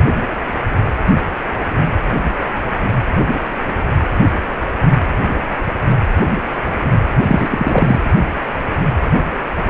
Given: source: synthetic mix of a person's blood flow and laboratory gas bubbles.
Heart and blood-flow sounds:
Doppler ultrasound of blood flow; precordium
7.27-7.99 s: bubbles
From the record:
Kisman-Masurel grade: 213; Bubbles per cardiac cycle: several, 3 to 8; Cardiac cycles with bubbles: 1 to 10%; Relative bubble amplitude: loud (0.450 to 0.775); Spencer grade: 1 (occasional bubble signal discernible with the cardiac motion signal, with majority of cardiac periods free of bubbles); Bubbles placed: anywhere in the cardiac cycle

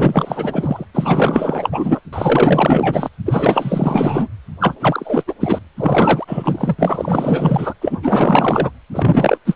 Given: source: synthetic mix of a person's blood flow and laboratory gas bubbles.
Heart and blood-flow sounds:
Doppler ultrasound of blood flow; precordium
0.00-0.85 s: bubbles
0.94-2.00 s: bubbles
2.12-3.08 s: bubbles
3.25-4.28 s: bubbles
4.60-4.74 s: bubbles
4.80-5.24 s: bubbles
5.27-5.33 s: bubbles
5.40-5.58 s: bubbles
5.77-6.25 s: bubbles
6.27-6.75 s: bubbles
6.79-7.74 s: bubbles
7.81-8.00 s: bubbles
8.03-8.71 s: bubbles
8.92-9.38 s: bubbles
9.45-9.56 s: bubbles
From the record:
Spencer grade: 4 (maximum detectable bubble signal sounding continuously throughout systole and diastole of every cardiac period, and overriding the amplitude of the normal cardiac signals); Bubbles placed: anywhere in the cardiac cycle

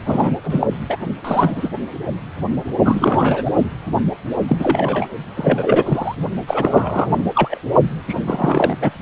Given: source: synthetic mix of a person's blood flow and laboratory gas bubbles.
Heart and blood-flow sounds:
Doppler ultrasound of blood flow; precordium
0.05-0.35 s: bubbles
0.43-0.67 s: bubbles
0.89-0.98 s: bubbles
1.24-1.69 s: bubbles
2.85-3.42 s: bubbles
3.45-3.51 s: bubbles
3.58-3.65 s: bubbles
4.47-5.07 s: bubbles
5.36-6.15 s: bubbles
6.47-7.25 s: bubbles
7.34-7.58 s: bubbles
8.07-8.75 s: bubbles
8.80-8.90 s: bubbles
From the record:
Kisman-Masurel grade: 243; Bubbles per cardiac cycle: several, 3 to 8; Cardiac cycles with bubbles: 100%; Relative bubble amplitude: loud (0.450 to 0.775); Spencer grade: 3 (all of the cardiac periods contain showers or single bubble signals, but not dominating or overriding the cardiac motion signals); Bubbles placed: only in the low amplitude regions of the cardiac cycle

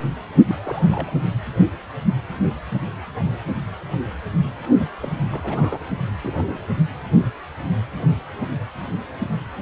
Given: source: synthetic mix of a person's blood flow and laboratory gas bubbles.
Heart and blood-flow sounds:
Doppler ultrasound of blood flow; precordium
0.48-1.23 s: bubbles
4.78-4.88 s: bubbles
5.01-5.15 s: bubbles
5.30-5.79 s: bubbles
6.23-6.58 s: bubbles
6.60-6.67 s: bubbles
From the record:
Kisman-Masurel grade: 221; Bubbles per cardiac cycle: several, 3 to 8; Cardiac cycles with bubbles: 10 to 50%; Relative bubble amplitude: barely perceptible (0.100 to 0.250); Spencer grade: 2 (many but less than half of the cardiac periods contain bubble signals, singularly or in groups); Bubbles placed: only in the low amplitude regions of the cardiac cycle

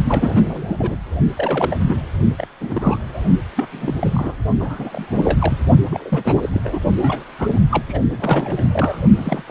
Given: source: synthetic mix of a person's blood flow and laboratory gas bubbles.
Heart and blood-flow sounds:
Doppler ultrasound of blood flow; precordium
0.08-0.97 s: bubbles
1.37-1.77 s: bubbles
1.88-1.97 s: bubbles
2.38-2.48 s: bubbles
2.60-3.23 s: bubbles
3.56-3.67 s: bubbles
3.72-3.95 s: bubbles
4.00-4.37 s: bubbles
4.60-5.67 s: bubbles
5.90-6.49 s: bubbles
6.53-6.61 s: bubbles
6.64-6.79 s: bubbles
7.00-7.24 s: bubbles
7.38-7.60 s: bubbles
7.71-7.84 s: bubbles
7.88-8.01 s: bubbles
8.09-9.00 s: bubbles
9.17-9.44 s: bubbles
9.47-9.51 s: bubbles
From the record:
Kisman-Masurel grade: 342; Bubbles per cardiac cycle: rolling drumbeat, 9 or more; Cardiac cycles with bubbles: 100%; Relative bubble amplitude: moderate (0.250 to 0.450); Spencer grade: 3 (all of the cardiac periods contain showers or single bubble signals, but not dominating or overriding the cardiac motion signals); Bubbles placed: only in the low amplitude regions of the cardiac cycle

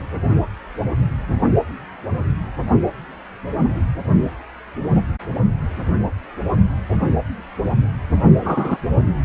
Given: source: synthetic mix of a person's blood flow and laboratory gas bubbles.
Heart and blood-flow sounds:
Doppler ultrasound of blood flow; precordium
8.41-8.77 s: bubbles
From the record:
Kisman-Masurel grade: 113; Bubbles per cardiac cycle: 1 to 2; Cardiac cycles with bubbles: 1 to 10%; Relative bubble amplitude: loud (0.450 to 0.775); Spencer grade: 1 (occasional bubble signal discernible with the cardiac motion signal, with majority of cardiac periods free of bubbles); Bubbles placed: anywhere in the cardiac cycle

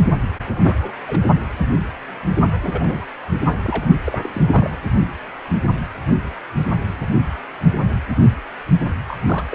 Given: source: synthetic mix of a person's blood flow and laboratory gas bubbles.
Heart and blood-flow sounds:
Doppler ultrasound of blood flow; precordium
0.43-0.76 s: bubbles
0.82-0.91 s: bubbles
1.07-1.20 s: bubbles
2.62-3.06 s: bubbles
3.63-3.88 s: bubbles
4.04-4.18 s: bubbles
4.22-4.29 s: bubbles
4.33-4.49 s: bubbles
4.53-4.71 s: bubbles
9.08-9.55 s: bubbles
From the record:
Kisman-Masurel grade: 221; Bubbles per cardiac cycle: several, 3 to 8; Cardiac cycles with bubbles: 10 to 50%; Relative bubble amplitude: barely perceptible (0.100 to 0.250); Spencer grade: 2 (many but less than half of the cardiac periods contain bubble signals, singularly or in groups); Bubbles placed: only in the low amplitude regions of the cardiac cycle

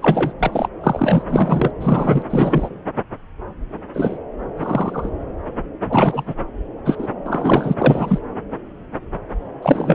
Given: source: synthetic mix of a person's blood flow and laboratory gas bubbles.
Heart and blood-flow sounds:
Doppler ultrasound of blood flow; subclavian vein
0.00-0.33 s: bubbles
0.39-0.69 s: bubbles
0.83-1.23 s: bubbles
1.28-1.71 s: bubbles
1.80-2.23 s: bubbles
2.29-2.75 s: bubbles
3.94-4.18 s: bubbles
4.57-5.09 s: bubbles
5.89-6.35 s: bubbles
6.85-7.08 s: bubbles
7.26-7.75 s: bubbles
7.78-8.19 s: bubbles
9.62-9.95 s: bubbles
From the record:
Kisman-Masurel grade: 233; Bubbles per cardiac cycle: several, 3 to 8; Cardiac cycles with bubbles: 50 to 99%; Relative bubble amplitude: loud (0.450 to 0.775); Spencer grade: 3 (all of the cardiac periods contain showers or single bubble signals, but not dominating or overriding the cardiac motion signals); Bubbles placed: anywhere in the cardiac cycle

